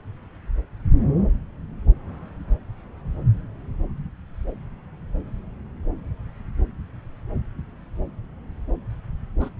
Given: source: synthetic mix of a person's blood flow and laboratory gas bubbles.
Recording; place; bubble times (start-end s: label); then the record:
Doppler ultrasound of blood flow; subclavian vein
9.40-9.49 s: bubbles
From the record:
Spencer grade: 1 (occasional bubble signal discernible with the cardiac motion signal, with majority of cardiac periods free of bubbles); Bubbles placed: anywhere in the cardiac cycle